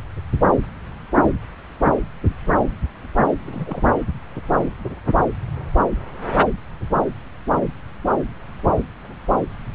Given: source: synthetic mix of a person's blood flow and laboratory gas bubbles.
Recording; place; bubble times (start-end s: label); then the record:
Doppler ultrasound of blood flow; subclavian vein
3.42-3.82 s: bubbles
3.86-3.89 s: bubbles
From the record:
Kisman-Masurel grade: 211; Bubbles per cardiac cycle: several, 3 to 8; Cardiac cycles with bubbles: 1 to 10%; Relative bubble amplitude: barely perceptible (0.100 to 0.250); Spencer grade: 1 (occasional bubble signal discernible with the cardiac motion signal, with majority of cardiac periods free of bubbles); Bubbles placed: anywhere in the cardiac cycle